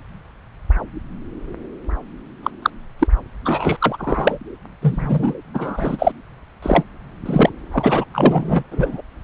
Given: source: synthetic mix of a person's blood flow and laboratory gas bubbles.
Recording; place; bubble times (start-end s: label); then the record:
Doppler ultrasound of blood flow; subclavian vein
2.42-2.50 s: bubbles
2.62-2.70 s: bubbles
2.99-3.07 s: bubbles
3.45-3.77 s: bubbles
3.79-4.38 s: bubbles
4.82-5.34 s: bubbles
5.54-6.12 s: bubbles
6.62-6.83 s: bubbles
7.25-7.50 s: bubbles
7.72-8.04 s: bubbles
8.13-8.63 s: bubbles
8.71-9.01 s: bubbles
From the record:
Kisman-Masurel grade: 233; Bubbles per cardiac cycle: several, 3 to 8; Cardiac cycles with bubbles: 50 to 99%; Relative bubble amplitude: loud (0.450 to 0.775); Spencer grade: 3 (all of the cardiac periods contain showers or single bubble signals, but not dominating or overriding the cardiac motion signals); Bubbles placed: anywhere in the cardiac cycle